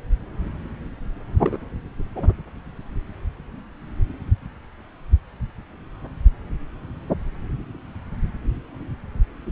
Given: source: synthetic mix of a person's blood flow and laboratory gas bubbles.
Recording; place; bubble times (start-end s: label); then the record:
Doppler ultrasound of blood flow; subclavian vein
1.40-1.57 s: bubbles
2.15-2.32 s: bubbles
From the record:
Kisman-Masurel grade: 212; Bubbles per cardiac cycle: several, 3 to 8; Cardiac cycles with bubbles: 1 to 10%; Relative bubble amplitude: moderate (0.250 to 0.450); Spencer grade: 1 (occasional bubble signal discernible with the cardiac motion signal, with majority of cardiac periods free of bubbles); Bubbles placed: anywhere in the cardiac cycle